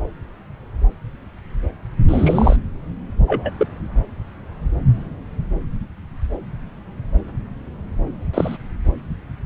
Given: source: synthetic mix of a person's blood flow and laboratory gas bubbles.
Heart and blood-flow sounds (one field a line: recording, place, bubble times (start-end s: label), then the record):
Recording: Doppler ultrasound of blood flow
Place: subclavian vein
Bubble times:
2.08-2.56 s: bubbles
3.28-3.50 s: bubbles
3.57-3.67 s: bubbles
8.33-8.57 s: bubbles
From the record:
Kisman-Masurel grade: 123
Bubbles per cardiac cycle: 1 to 2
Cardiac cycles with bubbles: 10 to 50%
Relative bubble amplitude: loud (0.450 to 0.775)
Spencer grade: 2 (many but less than half of the cardiac periods contain bubble signals, singularly or in groups)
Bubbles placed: anywhere in the cardiac cycle